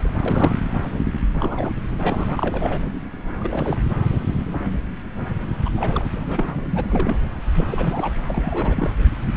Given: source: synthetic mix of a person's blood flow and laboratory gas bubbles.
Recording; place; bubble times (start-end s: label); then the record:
Doppler ultrasound of blood flow; subclavian vein
0.00-0.13 s: bubbles
0.25-0.55 s: bubbles
1.33-1.71 s: bubbles
1.98-2.81 s: bubbles
3.38-3.81 s: bubbles
5.65-5.69 s: bubbles
5.75-6.04 s: bubbles
6.15-6.49 s: bubbles
6.63-7.17 s: bubbles
7.54-7.67 s: bubbles
7.70-8.12 s: bubbles
8.29-8.95 s: bubbles
From the record:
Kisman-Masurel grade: 332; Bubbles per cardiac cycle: rolling drumbeat, 9 or more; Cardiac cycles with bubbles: 50 to 99%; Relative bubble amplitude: moderate (0.250 to 0.450); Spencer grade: 3 (all of the cardiac periods contain showers or single bubble signals, but not dominating or overriding the cardiac motion signals); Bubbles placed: anywhere in the cardiac cycle